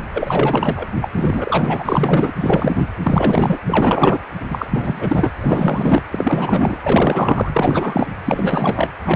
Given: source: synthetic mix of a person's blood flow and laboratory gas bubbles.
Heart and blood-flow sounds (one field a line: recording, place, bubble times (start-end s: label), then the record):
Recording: Doppler ultrasound of blood flow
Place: precordium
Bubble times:
0.13-0.86 s: bubbles
1.02-1.09 s: bubbles
1.16-2.33 s: bubbles
2.39-2.91 s: bubbles
3.02-3.60 s: bubbles
3.66-4.21 s: bubbles
4.50-4.66 s: bubbles
4.70-5.30 s: bubbles
5.41-6.02 s: bubbles
6.12-6.78 s: bubbles
6.83-8.07 s: bubbles
8.24-8.90 s: bubbles
9.04-9.16 s: bubbles
From the record:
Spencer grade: 4 (maximum detectable bubble signal sounding continuously throughout systole and diastole of every cardiac period, and overriding the amplitude of the normal cardiac signals)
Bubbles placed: anywhere in the cardiac cycle